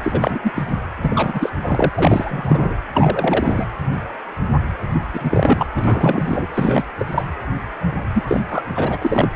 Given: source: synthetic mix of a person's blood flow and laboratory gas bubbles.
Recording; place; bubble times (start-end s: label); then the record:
Doppler ultrasound of blood flow; precordium
0.02-0.39 s: bubbles
0.44-0.52 s: bubbles
0.55-0.66 s: bubbles
1.03-1.50 s: bubbles
1.61-1.90 s: bubbles
1.94-2.74 s: bubbles
2.94-3.67 s: bubbles
4.94-4.99 s: bubbles
5.13-5.67 s: bubbles
5.75-6.47 s: bubbles
6.54-6.84 s: bubbles
6.97-7.24 s: bubbles
8.14-8.23 s: bubbles
8.27-8.40 s: bubbles
8.50-8.62 s: bubbles
8.75-8.97 s: bubbles
9.01-9.28 s: bubbles
From the record:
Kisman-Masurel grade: 332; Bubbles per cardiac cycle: rolling drumbeat, 9 or more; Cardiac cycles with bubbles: 50 to 99%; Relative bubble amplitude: moderate (0.250 to 0.450); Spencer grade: 3 (all of the cardiac periods contain showers or single bubble signals, but not dominating or overriding the cardiac motion signals); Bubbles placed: anywhere in the cardiac cycle